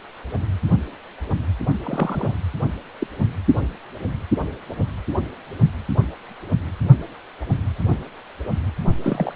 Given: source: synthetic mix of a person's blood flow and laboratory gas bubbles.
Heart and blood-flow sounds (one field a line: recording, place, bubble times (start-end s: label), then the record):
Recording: Doppler ultrasound of blood flow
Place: precordium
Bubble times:
1.83-2.31 s: bubbles
3.00-3.06 s: bubbles
9.03-9.32 s: bubbles
From the record:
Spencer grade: 2 (many but less than half of the cardiac periods contain bubble signals, singularly or in groups)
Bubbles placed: only in the low amplitude regions of the cardiac cycle